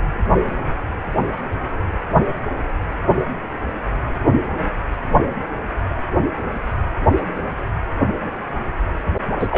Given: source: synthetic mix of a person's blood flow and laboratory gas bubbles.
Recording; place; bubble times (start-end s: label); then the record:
Doppler ultrasound of blood flow; precordium
9.39-9.48 s: bubbles
9.51-9.58 s: bubbles
From the record:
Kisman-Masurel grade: 212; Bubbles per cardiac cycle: several, 3 to 8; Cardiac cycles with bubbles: 1 to 10%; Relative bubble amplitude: moderate (0.250 to 0.450); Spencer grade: 1 (occasional bubble signal discernible with the cardiac motion signal, with majority of cardiac periods free of bubbles); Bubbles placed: anywhere in the cardiac cycle